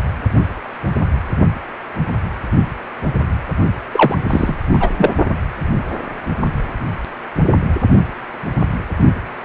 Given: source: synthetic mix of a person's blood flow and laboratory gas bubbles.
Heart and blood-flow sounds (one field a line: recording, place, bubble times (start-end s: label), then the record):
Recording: Doppler ultrasound of blood flow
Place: precordium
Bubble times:
3.92-4.17 s: bubbles
4.29-4.57 s: bubbles
4.71-4.90 s: bubbles
4.96-5.11 s: bubbles
From the record:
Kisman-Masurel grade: 213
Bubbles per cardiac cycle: several, 3 to 8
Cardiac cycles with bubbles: 1 to 10%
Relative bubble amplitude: loud (0.450 to 0.775)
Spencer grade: 1 (occasional bubble signal discernible with the cardiac motion signal, with majority of cardiac periods free of bubbles)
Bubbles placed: only in the low amplitude regions of the cardiac cycle